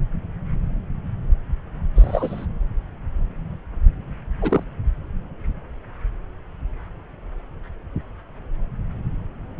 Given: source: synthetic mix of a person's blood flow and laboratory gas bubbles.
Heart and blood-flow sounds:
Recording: Doppler ultrasound of blood flow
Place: subclavian vein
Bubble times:
1.95-2.46 s: bubbles
4.42-4.63 s: bubbles
From the record:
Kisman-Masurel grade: 122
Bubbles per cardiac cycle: 1 to 2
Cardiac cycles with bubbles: 10 to 50%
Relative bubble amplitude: moderate (0.250 to 0.450)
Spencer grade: 2 (many but less than half of the cardiac periods contain bubble signals, singularly or in groups)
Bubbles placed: anywhere in the cardiac cycle

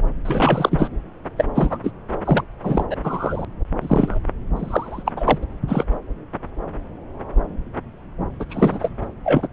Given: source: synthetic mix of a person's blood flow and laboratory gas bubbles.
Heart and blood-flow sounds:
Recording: Doppler ultrasound of blood flow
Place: subclavian vein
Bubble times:
0.25-0.89 s: bubbles
1.38-1.44 s: bubbles
1.54-1.78 s: bubbles
1.83-1.91 s: bubbles
2.25-2.44 s: bubbles
2.63-2.86 s: bubbles
2.90-2.96 s: bubbles
3.04-3.45 s: bubbles
3.81-4.19 s: bubbles
4.56-5.03 s: bubbles
5.05-5.12 s: bubbles
5.16-5.38 s: bubbles
5.67-5.84 s: bubbles
8.39-8.45 s: bubbles
8.49-8.89 s: bubbles
9.23-9.48 s: bubbles
From the record:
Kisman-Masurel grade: 233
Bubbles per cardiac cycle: several, 3 to 8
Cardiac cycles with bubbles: 50 to 99%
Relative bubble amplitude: loud (0.450 to 0.775)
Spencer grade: 3 (all of the cardiac periods contain showers or single bubble signals, but not dominating or overriding the cardiac motion signals)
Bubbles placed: anywhere in the cardiac cycle

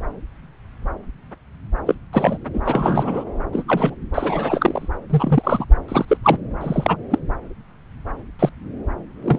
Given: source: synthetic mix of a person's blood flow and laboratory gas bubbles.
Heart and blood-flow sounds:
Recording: Doppler ultrasound of blood flow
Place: subclavian vein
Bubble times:
1.86-1.95 s: bubbles
2.13-2.38 s: bubbles
2.54-2.60 s: bubbles
2.65-3.24 s: bubbles
3.52-3.64 s: bubbles
3.67-3.95 s: bubbles
4.14-4.89 s: bubbles
5.10-5.66 s: bubbles
5.88-6.05 s: bubbles
6.08-6.17 s: bubbles
6.24-6.38 s: bubbles
6.61-6.96 s: bubbles
7.10-7.19 s: bubbles
8.39-8.49 s: bubbles
9.22-9.39 s: bubbles
From the record:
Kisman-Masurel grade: 233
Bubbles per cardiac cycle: several, 3 to 8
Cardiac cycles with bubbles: 50 to 99%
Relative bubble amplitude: loud (0.450 to 0.775)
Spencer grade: 3 (all of the cardiac periods contain showers or single bubble signals, but not dominating or overriding the cardiac motion signals)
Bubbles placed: anywhere in the cardiac cycle

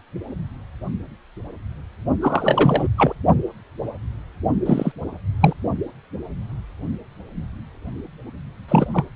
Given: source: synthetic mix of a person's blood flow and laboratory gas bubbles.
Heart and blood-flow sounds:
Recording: Doppler ultrasound of blood flow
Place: precordium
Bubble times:
2.21-2.88 s: bubbles
2.97-3.14 s: bubbles
4.66-4.92 s: bubbles
5.41-5.54 s: bubbles
8.68-8.88 s: bubbles
8.92-9.04 s: bubbles
From the record:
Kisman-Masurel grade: 222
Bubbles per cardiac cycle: several, 3 to 8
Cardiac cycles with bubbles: 10 to 50%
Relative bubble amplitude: moderate (0.250 to 0.450)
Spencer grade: 2 (many but less than half of the cardiac periods contain bubble signals, singularly or in groups)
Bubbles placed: only in the low amplitude regions of the cardiac cycle

